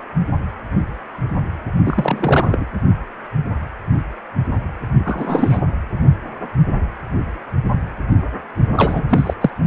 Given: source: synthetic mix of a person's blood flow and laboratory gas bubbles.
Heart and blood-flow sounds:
Doppler ultrasound of blood flow; precordium
1.85-2.65 s: bubbles
5.04-5.62 s: bubbles
8.75-9.02 s: bubbles
9.09-9.34 s: bubbles
9.41-9.50 s: bubbles
From the record:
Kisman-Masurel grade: 223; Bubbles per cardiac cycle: several, 3 to 8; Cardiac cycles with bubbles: 10 to 50%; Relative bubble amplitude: loud (0.450 to 0.775); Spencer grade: 2 (many but less than half of the cardiac periods contain bubble signals, singularly or in groups); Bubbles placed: only in the low amplitude regions of the cardiac cycle

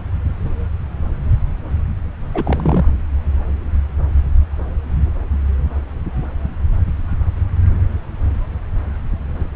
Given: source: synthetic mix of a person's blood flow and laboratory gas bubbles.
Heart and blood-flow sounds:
Doppler ultrasound of blood flow; subclavian vein
2.34-2.85 s: bubbles
From the record:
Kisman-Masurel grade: 212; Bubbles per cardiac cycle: several, 3 to 8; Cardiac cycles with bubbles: 1 to 10%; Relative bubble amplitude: moderate (0.250 to 0.450); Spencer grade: 1 (occasional bubble signal discernible with the cardiac motion signal, with majority of cardiac periods free of bubbles); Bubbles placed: anywhere in the cardiac cycle

